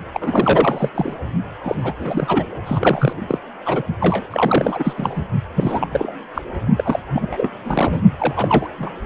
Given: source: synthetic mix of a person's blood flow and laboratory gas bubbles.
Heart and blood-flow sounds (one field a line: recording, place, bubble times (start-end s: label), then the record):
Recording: Doppler ultrasound of blood flow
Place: precordium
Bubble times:
0.13-0.91 s: bubbles
0.94-1.16 s: bubbles
1.64-1.94 s: bubbles
1.99-2.46 s: bubbles
2.66-3.12 s: bubbles
3.28-3.39 s: bubbles
3.66-3.83 s: bubbles
4.00-4.28 s: bubbles
4.30-4.93 s: bubbles
4.97-5.22 s: bubbles
5.55-5.88 s: bubbles
5.92-6.13 s: bubbles
6.34-6.42 s: bubbles
6.78-7.00 s: bubbles
7.13-7.49 s: bubbles
7.65-8.00 s: bubbles
8.18-8.67 s: bubbles
8.79-8.89 s: bubbles
From the record:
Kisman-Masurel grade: 342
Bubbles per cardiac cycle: rolling drumbeat, 9 or more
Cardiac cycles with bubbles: 100%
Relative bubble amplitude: moderate (0.250 to 0.450)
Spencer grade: 3 (all of the cardiac periods contain showers or single bubble signals, but not dominating or overriding the cardiac motion signals)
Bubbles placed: only in the low amplitude regions of the cardiac cycle